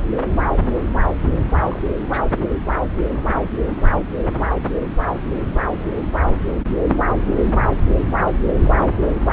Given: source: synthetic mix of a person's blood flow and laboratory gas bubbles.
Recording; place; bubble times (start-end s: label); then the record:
Doppler ultrasound of blood flow; subclavian vein
1.31-1.81 s: bubbles
2.10-2.27 s: bubbles
8.51-8.87 s: bubbles
8.89-9.12 s: bubbles
9.16-9.22 s: bubbles
From the record:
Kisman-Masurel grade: 221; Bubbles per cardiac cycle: several, 3 to 8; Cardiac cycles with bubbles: 10 to 50%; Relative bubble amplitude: barely perceptible (0.100 to 0.250); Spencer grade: 2 (many but less than half of the cardiac periods contain bubble signals, singularly or in groups); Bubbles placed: anywhere in the cardiac cycle